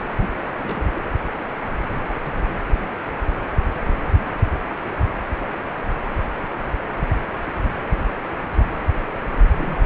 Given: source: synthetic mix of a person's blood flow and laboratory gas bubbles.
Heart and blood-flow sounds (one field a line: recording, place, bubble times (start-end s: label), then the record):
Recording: Doppler ultrasound of blood flow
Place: precordium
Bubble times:
0.21-0.29 s: bubbles
0.58-0.99 s: bubbles
9.53-9.86 s: bubbles
From the record:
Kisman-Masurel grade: 211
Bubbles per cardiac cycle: several, 3 to 8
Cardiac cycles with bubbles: 1 to 10%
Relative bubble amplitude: barely perceptible (0.100 to 0.250)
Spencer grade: 1 (occasional bubble signal discernible with the cardiac motion signal, with majority of cardiac periods free of bubbles)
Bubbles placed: anywhere in the cardiac cycle